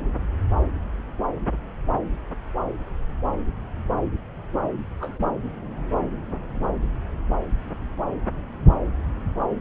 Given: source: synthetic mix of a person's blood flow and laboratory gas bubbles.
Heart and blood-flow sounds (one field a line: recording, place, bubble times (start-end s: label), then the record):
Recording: Doppler ultrasound of blood flow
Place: subclavian vein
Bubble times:
4.98-5.40 s: bubbles
From the record:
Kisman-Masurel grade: 111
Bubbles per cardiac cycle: 1 to 2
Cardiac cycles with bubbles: 1 to 10%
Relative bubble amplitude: barely perceptible (0.100 to 0.250)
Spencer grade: 1 (occasional bubble signal discernible with the cardiac motion signal, with majority of cardiac periods free of bubbles)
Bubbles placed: anywhere in the cardiac cycle